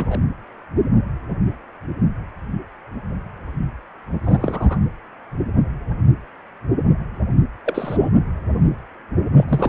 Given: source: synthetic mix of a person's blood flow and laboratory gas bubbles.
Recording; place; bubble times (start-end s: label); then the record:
Doppler ultrasound of blood flow; precordium
0.00-0.18 s: bubbles
4.24-4.79 s: bubbles
7.66-8.10 s: bubbles
9.37-9.45 s: bubbles
9.48-9.69 s: bubbles
From the record:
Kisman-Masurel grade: 222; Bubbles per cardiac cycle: several, 3 to 8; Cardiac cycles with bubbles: 10 to 50%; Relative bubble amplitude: moderate (0.250 to 0.450); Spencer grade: 2 (many but less than half of the cardiac periods contain bubble signals, singularly or in groups); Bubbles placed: anywhere in the cardiac cycle